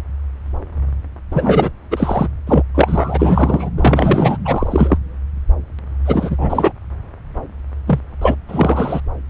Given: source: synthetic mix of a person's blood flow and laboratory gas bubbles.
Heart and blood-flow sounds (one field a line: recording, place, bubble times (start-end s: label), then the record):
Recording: Doppler ultrasound of blood flow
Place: subclavian vein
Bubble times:
1.30-1.71 s: bubbles
1.91-2.29 s: bubbles
2.46-2.62 s: bubbles
2.75-3.70 s: bubbles
3.77-4.37 s: bubbles
4.45-4.98 s: bubbles
6.06-6.72 s: bubbles
7.87-8.00 s: bubbles
8.21-8.36 s: bubbles
8.48-9.01 s: bubbles
From the record:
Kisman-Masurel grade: 333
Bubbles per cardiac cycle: rolling drumbeat, 9 or more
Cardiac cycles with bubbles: 50 to 99%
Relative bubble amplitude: loud (0.450 to 0.775)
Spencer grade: 3 (all of the cardiac periods contain showers or single bubble signals, but not dominating or overriding the cardiac motion signals)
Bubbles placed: anywhere in the cardiac cycle